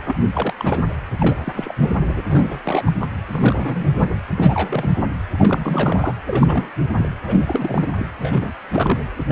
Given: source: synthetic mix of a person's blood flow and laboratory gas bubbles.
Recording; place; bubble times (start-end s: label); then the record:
Doppler ultrasound of blood flow; precordium
0.05-0.16 s: bubbles
0.34-0.53 s: bubbles
0.58-0.81 s: bubbles
1.18-1.35 s: bubbles
1.39-1.52 s: bubbles
1.55-1.75 s: bubbles
1.80-1.91 s: bubbles
2.00-2.21 s: bubbles
2.29-2.62 s: bubbles
2.65-2.92 s: bubbles
3.01-3.07 s: bubbles
3.29-4.17 s: bubbles
4.36-4.96 s: bubbles
5.33-6.16 s: bubbles
6.27-6.70 s: bubbles
6.98-7.08 s: bubbles
7.27-7.91 s: bubbles
7.98-8.10 s: bubbles
8.19-8.53 s: bubbles
8.68-9.00 s: bubbles
9.26-9.32 s: bubbles
From the record:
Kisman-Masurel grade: 342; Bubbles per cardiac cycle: rolling drumbeat, 9 or more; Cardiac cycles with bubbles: 100%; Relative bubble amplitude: moderate (0.250 to 0.450); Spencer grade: 3 (all of the cardiac periods contain showers or single bubble signals, but not dominating or overriding the cardiac motion signals); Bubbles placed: anywhere in the cardiac cycle